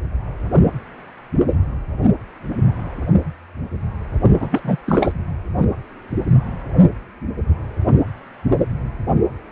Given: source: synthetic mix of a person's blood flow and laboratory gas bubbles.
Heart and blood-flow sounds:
Doppler ultrasound of blood flow; precordium
4.40-4.48 s: bubbles
4.51-4.61 s: bubbles
4.64-4.77 s: bubbles
4.86-5.12 s: bubbles
From the record:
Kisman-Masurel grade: 212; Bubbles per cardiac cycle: several, 3 to 8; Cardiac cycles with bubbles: 1 to 10%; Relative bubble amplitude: moderate (0.250 to 0.450); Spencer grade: 1 (occasional bubble signal discernible with the cardiac motion signal, with majority of cardiac periods free of bubbles); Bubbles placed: only in the low amplitude regions of the cardiac cycle

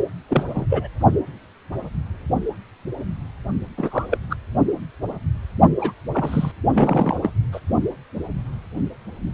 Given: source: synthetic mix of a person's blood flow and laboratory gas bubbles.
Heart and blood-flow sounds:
Doppler ultrasound of blood flow; precordium
0.29-0.45 s: bubbles
0.47-0.66 s: bubbles
0.69-0.88 s: bubbles
3.77-4.19 s: bubbles
4.30-4.36 s: bubbles
5.78-5.92 s: bubbles
6.12-6.52 s: bubbles
6.73-7.17 s: bubbles
7.22-7.31 s: bubbles
7.52-7.60 s: bubbles
From the record:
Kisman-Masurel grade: 222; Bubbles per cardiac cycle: several, 3 to 8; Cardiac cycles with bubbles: 10 to 50%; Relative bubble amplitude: moderate (0.250 to 0.450); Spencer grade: 2 (many but less than half of the cardiac periods contain bubble signals, singularly or in groups); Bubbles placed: only in the low amplitude regions of the cardiac cycle

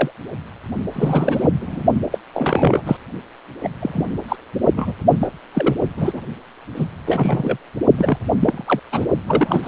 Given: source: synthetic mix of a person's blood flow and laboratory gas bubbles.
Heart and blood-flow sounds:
Doppler ultrasound of blood flow; precordium
0.00-0.10 s: bubbles
0.93-1.51 s: bubbles
1.60-1.82 s: bubbles
2.11-2.19 s: bubbles
2.34-2.97 s: bubbles
3.62-3.70 s: bubbles
3.80-4.04 s: bubbles
4.28-4.36 s: bubbles
4.75-4.93 s: bubbles
5.20-5.28 s: bubbles
5.54-5.74 s: bubbles
5.96-6.21 s: bubbles
6.76-6.87 s: bubbles
7.06-7.58 s: bubbles
7.97-8.18 s: bubbles
8.41-8.62 s: bubbles
8.67-8.79 s: bubbles
8.92-9.06 s: bubbles
9.27-9.68 s: bubbles
From the record:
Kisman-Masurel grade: 242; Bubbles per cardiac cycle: several, 3 to 8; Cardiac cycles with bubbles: 100%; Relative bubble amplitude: moderate (0.250 to 0.450); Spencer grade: 3 (all of the cardiac periods contain showers or single bubble signals, but not dominating or overriding the cardiac motion signals); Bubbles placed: only in the low amplitude regions of the cardiac cycle

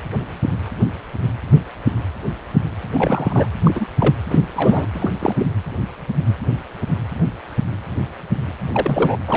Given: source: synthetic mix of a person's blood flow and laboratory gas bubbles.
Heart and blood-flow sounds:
Doppler ultrasound of blood flow; precordium
2.94-3.48 s: bubbles
3.63-3.87 s: bubbles
4.00-4.14 s: bubbles
4.29-4.38 s: bubbles
4.55-4.87 s: bubbles
4.94-5.16 s: bubbles
5.20-5.46 s: bubbles
8.72-9.16 s: bubbles
9.27-9.36 s: bubbles
From the record:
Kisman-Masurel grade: 222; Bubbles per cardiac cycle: several, 3 to 8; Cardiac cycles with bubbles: 10 to 50%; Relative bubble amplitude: moderate (0.250 to 0.450); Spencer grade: 2 (many but less than half of the cardiac periods contain bubble signals, singularly or in groups); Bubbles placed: anywhere in the cardiac cycle

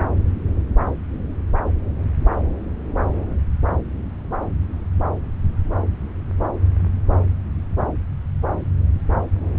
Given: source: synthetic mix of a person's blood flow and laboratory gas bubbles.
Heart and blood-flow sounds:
Doppler ultrasound of blood flow; subclavian vein
no bubbles
From the record:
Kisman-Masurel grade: 000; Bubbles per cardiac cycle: 0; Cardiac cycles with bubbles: 0%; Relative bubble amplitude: no bubbles discernible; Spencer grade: 0 (complete lack of bubble signals)

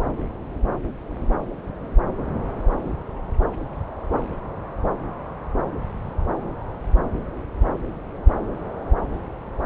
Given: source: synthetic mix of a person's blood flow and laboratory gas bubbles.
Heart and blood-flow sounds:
Doppler ultrasound of blood flow; subclavian vein
no bubbles
From the record:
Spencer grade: 0 (complete lack of bubble signals)

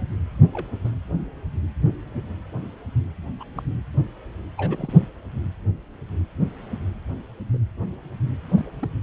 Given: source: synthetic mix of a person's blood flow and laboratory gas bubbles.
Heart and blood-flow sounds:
Doppler ultrasound of blood flow; precordium
0.53-0.67 s: bubbles
0.84-0.90 s: bubbles
3.40-3.43 s: bubbles
3.55-3.62 s: bubbles
4.57-5.00 s: bubbles
7.53-7.57 s: bubbles
8.56-8.70 s: bubbles
8.80-8.88 s: bubbles
From the record:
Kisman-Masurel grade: 121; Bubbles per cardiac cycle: 1 to 2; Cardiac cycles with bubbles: 10 to 50%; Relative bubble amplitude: barely perceptible (0.100 to 0.250); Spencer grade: 2 (many but less than half of the cardiac periods contain bubble signals, singularly or in groups); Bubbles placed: anywhere in the cardiac cycle

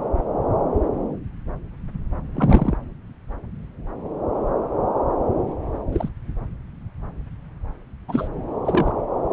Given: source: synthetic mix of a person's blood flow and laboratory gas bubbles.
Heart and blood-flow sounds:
Doppler ultrasound of blood flow; subclavian vein
2.35-2.77 s: bubbles
5.92-6.09 s: bubbles
8.08-8.28 s: bubbles
8.64-8.92 s: bubbles
From the record:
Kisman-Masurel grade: 122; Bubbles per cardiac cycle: 1 to 2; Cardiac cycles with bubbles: 10 to 50%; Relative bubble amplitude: moderate (0.250 to 0.450); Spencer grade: 2 (many but less than half of the cardiac periods contain bubble signals, singularly or in groups); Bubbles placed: anywhere in the cardiac cycle

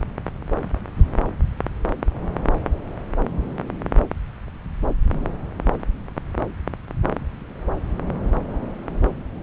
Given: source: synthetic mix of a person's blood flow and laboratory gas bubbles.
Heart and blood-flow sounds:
Doppler ultrasound of blood flow; subclavian vein
no bubbles
From the record:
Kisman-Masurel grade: 000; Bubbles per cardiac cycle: 0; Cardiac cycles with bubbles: 0%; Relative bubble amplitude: no bubbles discernible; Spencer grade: 0 (complete lack of bubble signals)

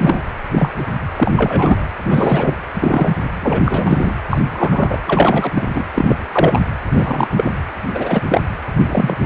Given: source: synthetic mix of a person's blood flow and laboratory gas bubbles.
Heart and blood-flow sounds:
Doppler ultrasound of blood flow; precordium
0.00-0.23 s: bubbles
0.52-0.70 s: bubbles
0.78-0.84 s: bubbles
1.16-1.33 s: bubbles
1.36-1.86 s: bubbles
2.05-2.54 s: bubbles
2.73-3.17 s: bubbles
3.40-4.14 s: bubbles
4.29-4.38 s: bubbles
4.51-5.00 s: bubbles
5.05-5.67 s: bubbles
5.75-5.84 s: bubbles
5.94-6.16 s: bubbles
6.30-6.60 s: bubbles
6.91-7.28 s: bubbles
7.37-7.51 s: bubbles
7.94-8.23 s: bubbles
8.29-8.41 s: bubbles
8.76-9.16 s: bubbles
9.20-9.26 s: bubbles
From the record:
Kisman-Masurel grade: 243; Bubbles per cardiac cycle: several, 3 to 8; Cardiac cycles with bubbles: 100%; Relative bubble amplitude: loud (0.450 to 0.775); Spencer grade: 3 (all of the cardiac periods contain showers or single bubble signals, but not dominating or overriding the cardiac motion signals); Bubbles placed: anywhere in the cardiac cycle

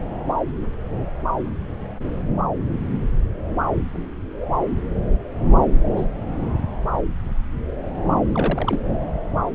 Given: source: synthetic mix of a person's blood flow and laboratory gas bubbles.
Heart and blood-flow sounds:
Doppler ultrasound of blood flow; subclavian vein
5.96-6.06 s: bubbles
8.32-8.81 s: bubbles
From the record:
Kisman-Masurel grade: 121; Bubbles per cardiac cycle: 1 to 2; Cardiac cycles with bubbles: 10 to 50%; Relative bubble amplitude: barely perceptible (0.100 to 0.250); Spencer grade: 2 (many but less than half of the cardiac periods contain bubble signals, singularly or in groups); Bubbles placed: anywhere in the cardiac cycle

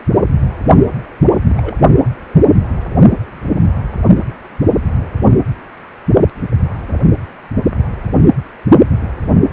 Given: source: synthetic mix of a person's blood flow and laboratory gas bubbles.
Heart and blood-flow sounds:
Doppler ultrasound of blood flow; precordium
1.49-1.76 s: bubbles
From the record:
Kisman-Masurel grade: 112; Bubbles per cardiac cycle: 1 to 2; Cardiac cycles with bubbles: 1 to 10%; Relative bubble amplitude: moderate (0.250 to 0.450); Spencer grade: 1 (occasional bubble signal discernible with the cardiac motion signal, with majority of cardiac periods free of bubbles); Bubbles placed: only in the low amplitude regions of the cardiac cycle

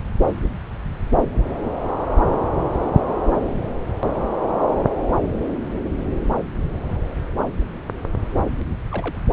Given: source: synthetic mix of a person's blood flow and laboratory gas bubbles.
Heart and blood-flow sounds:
Doppler ultrasound of blood flow; subclavian vein
1.16-1.46 s: bubbles
3.46-3.50 s: bubbles
3.58-3.69 s: bubbles
8.91-9.19 s: bubbles
From the record:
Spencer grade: 2 (many but less than half of the cardiac periods contain bubble signals, singularly or in groups); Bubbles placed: anywhere in the cardiac cycle

